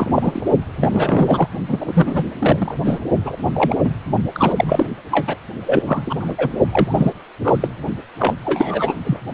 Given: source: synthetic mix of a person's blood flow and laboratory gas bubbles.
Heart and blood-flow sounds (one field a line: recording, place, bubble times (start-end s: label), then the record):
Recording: Doppler ultrasound of blood flow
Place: precordium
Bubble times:
0.00-0.45 s: bubbles
0.80-1.48 s: bubbles
1.68-2.24 s: bubbles
2.39-2.77 s: bubbles
2.85-3.00 s: bubbles
3.25-3.37 s: bubbles
3.54-3.75 s: bubbles
3.84-3.94 s: bubbles
4.35-4.53 s: bubbles
4.56-4.86 s: bubbles
5.11-5.36 s: bubbles
5.65-5.82 s: bubbles
5.86-6.15 s: bubbles
6.19-6.35 s: bubbles
6.38-6.49 s: bubbles
6.70-7.10 s: bubbles
7.44-7.56 s: bubbles
7.60-7.68 s: bubbles
8.19-8.35 s: bubbles
8.45-8.96 s: bubbles
9.04-9.20 s: bubbles
From the record:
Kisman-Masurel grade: 243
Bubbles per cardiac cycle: several, 3 to 8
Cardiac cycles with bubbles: 100%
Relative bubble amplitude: loud (0.450 to 0.775)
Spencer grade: 3 (all of the cardiac periods contain showers or single bubble signals, but not dominating or overriding the cardiac motion signals)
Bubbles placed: only in the low amplitude regions of the cardiac cycle